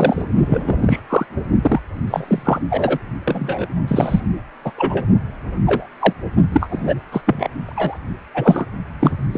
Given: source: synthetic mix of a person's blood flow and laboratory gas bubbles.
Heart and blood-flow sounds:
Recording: Doppler ultrasound of blood flow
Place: precordium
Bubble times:
0.00-0.26 s: bubbles
0.40-1.00 s: bubbles
1.09-1.26 s: bubbles
1.61-1.80 s: bubbles
2.08-2.60 s: bubbles
2.70-2.99 s: bubbles
3.25-3.66 s: bubbles
3.88-4.20 s: bubbles
4.64-4.71 s: bubbles
4.78-5.04 s: bubbles
5.66-5.87 s: bubbles
6.00-6.13 s: bubbles
6.52-6.95 s: bubbles
7.12-7.21 s: bubbles
7.26-7.49 s: bubbles
7.64-7.99 s: bubbles
8.34-8.66 s: bubbles
9.00-9.12 s: bubbles
9.31-9.37 s: bubbles
From the record:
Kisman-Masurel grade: 243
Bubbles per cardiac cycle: several, 3 to 8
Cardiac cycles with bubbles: 100%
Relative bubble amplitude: loud (0.450 to 0.775)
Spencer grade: 3 (all of the cardiac periods contain showers or single bubble signals, but not dominating or overriding the cardiac motion signals)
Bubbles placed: only in the low amplitude regions of the cardiac cycle

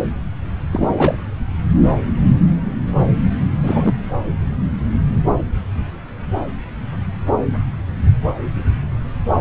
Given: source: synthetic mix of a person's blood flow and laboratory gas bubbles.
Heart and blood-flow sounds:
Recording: Doppler ultrasound of blood flow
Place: subclavian vein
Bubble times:
0.72-1.16 s: bubbles
3.62-3.94 s: bubbles
From the record:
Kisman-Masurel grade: 222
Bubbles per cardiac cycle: several, 3 to 8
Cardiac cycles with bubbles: 10 to 50%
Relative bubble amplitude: moderate (0.250 to 0.450)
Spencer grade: 2 (many but less than half of the cardiac periods contain bubble signals, singularly or in groups)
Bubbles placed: anywhere in the cardiac cycle

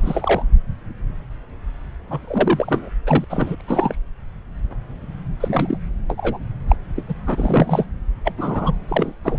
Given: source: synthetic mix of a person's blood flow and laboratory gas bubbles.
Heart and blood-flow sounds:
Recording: Doppler ultrasound of blood flow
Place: subclavian vein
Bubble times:
0.03-0.43 s: bubbles
2.09-2.90 s: bubbles
3.06-3.25 s: bubbles
3.29-3.55 s: bubbles
3.58-3.61 s: bubbles
3.67-3.95 s: bubbles
5.40-5.78 s: bubbles
6.09-6.38 s: bubbles
6.68-6.76 s: bubbles
6.96-7.04 s: bubbles
7.08-7.14 s: bubbles
7.27-7.86 s: bubbles
8.24-8.33 s: bubbles
8.38-8.75 s: bubbles
8.88-9.13 s: bubbles
9.24-9.38 s: bubbles
From the record:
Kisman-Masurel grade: 232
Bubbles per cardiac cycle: several, 3 to 8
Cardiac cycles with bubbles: 50 to 99%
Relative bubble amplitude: moderate (0.250 to 0.450)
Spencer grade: 3 (all of the cardiac periods contain showers or single bubble signals, but not dominating or overriding the cardiac motion signals)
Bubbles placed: anywhere in the cardiac cycle

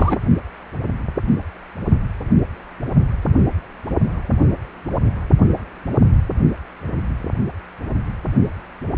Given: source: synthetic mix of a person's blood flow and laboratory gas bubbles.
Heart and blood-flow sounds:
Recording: Doppler ultrasound of blood flow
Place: precordium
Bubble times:
0.00-0.17 s: bubbles
From the record:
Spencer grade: 2 (many but less than half of the cardiac periods contain bubble signals, singularly or in groups)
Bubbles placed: only in the low amplitude regions of the cardiac cycle

